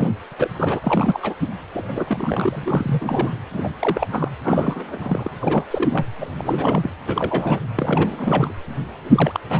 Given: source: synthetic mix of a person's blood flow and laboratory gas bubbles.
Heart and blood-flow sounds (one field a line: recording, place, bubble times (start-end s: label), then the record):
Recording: Doppler ultrasound of blood flow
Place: precordium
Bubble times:
0.00-0.10 s: bubbles
0.32-0.34 s: bubbles
0.39-0.48 s: bubbles
0.55-0.80 s: bubbles
0.83-1.35 s: bubbles
1.73-3.38 s: bubbles
3.53-3.72 s: bubbles
3.79-4.08 s: bubbles
4.12-4.28 s: bubbles
4.43-5.31 s: bubbles
5.41-6.05 s: bubbles
6.21-6.29 s: bubbles
6.37-6.90 s: bubbles
7.06-7.59 s: bubbles
7.75-8.53 s: bubbles
9.04-9.40 s: bubbles
9.49-9.60 s: bubbles
From the record:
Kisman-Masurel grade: 342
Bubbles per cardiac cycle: rolling drumbeat, 9 or more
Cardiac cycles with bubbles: 100%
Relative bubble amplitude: moderate (0.250 to 0.450)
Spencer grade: 3 (all of the cardiac periods contain showers or single bubble signals, but not dominating or overriding the cardiac motion signals)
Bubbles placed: anywhere in the cardiac cycle